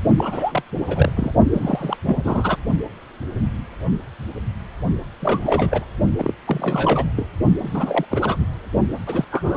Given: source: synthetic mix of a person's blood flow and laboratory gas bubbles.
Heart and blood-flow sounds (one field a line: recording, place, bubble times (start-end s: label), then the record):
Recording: Doppler ultrasound of blood flow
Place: precordium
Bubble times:
0.16-0.62 s: bubbles
0.88-1.12 s: bubbles
1.16-1.34 s: bubbles
1.52-1.97 s: bubbles
2.06-2.56 s: bubbles
5.20-5.86 s: bubbles
6.19-6.34 s: bubbles
6.46-7.07 s: bubbles
7.16-7.27 s: bubbles
7.64-8.05 s: bubbles
8.11-8.37 s: bubbles
8.40-8.46 s: bubbles
9.06-9.24 s: bubbles
9.30-9.57 s: bubbles
From the record:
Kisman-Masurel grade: 332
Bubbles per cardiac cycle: rolling drumbeat, 9 or more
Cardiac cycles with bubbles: 50 to 99%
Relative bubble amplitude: moderate (0.250 to 0.450)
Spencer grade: 3 (all of the cardiac periods contain showers or single bubble signals, but not dominating or overriding the cardiac motion signals)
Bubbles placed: only in the low amplitude regions of the cardiac cycle